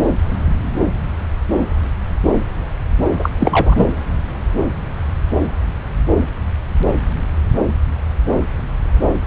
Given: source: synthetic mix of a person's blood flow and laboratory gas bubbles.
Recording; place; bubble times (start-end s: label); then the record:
Doppler ultrasound of blood flow; subclavian vein
3.19-3.29 s: bubbles
3.38-3.88 s: bubbles
From the record:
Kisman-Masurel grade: 213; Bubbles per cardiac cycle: several, 3 to 8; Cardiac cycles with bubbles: 1 to 10%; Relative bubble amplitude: loud (0.450 to 0.775); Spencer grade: 1 (occasional bubble signal discernible with the cardiac motion signal, with majority of cardiac periods free of bubbles); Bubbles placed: anywhere in the cardiac cycle